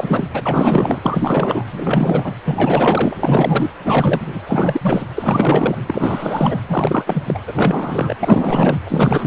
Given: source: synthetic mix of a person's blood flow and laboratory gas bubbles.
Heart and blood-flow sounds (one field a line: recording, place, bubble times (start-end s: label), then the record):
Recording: Doppler ultrasound of blood flow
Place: precordium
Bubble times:
0.00-0.28 s: bubbles
0.34-0.42 s: bubbles
0.46-1.00 s: bubbles
1.02-1.66 s: bubbles
1.72-2.32 s: bubbles
2.44-3.71 s: bubbles
3.84-4.21 s: bubbles
4.26-4.38 s: bubbles
4.47-5.06 s: bubbles
5.17-5.78 s: bubbles
5.86-6.58 s: bubbles
6.68-7.23 s: bubbles
7.26-7.40 s: bubbles
7.47-8.15 s: bubbles
8.20-8.78 s: bubbles
8.84-9.27 s: bubbles
From the record:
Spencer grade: 4 (maximum detectable bubble signal sounding continuously throughout systole and diastole of every cardiac period, and overriding the amplitude of the normal cardiac signals)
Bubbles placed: anywhere in the cardiac cycle